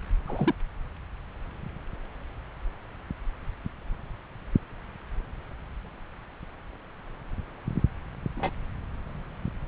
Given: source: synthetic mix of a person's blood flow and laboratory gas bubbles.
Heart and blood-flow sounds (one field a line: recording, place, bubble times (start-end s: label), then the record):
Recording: Doppler ultrasound of blood flow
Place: subclavian vein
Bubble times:
0.27-0.54 s: bubbles
8.36-8.51 s: bubbles
From the record:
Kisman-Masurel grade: 122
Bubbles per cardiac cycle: 1 to 2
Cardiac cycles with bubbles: 10 to 50%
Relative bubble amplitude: moderate (0.250 to 0.450)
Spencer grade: 2 (many but less than half of the cardiac periods contain bubble signals, singularly or in groups)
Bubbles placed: anywhere in the cardiac cycle